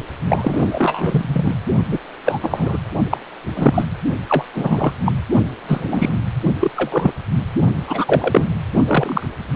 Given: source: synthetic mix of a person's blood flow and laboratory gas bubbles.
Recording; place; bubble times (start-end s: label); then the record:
Doppler ultrasound of blood flow; precordium
0.27-1.54 s: bubbles
1.91-1.99 s: bubbles
2.25-2.38 s: bubbles
2.42-2.77 s: bubbles
3.09-3.17 s: bubbles
3.56-3.87 s: bubbles
4.29-4.45 s: bubbles
4.55-4.93 s: bubbles
5.05-5.12 s: bubbles
5.67-6.16 s: bubbles
6.61-6.71 s: bubbles
6.76-7.12 s: bubbles
7.87-8.46 s: bubbles
8.87-9.26 s: bubbles
From the record:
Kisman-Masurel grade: 243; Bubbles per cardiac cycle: several, 3 to 8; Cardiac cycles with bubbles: 100%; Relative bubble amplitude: loud (0.450 to 0.775); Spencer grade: 3 (all of the cardiac periods contain showers or single bubble signals, but not dominating or overriding the cardiac motion signals); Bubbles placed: only in the low amplitude regions of the cardiac cycle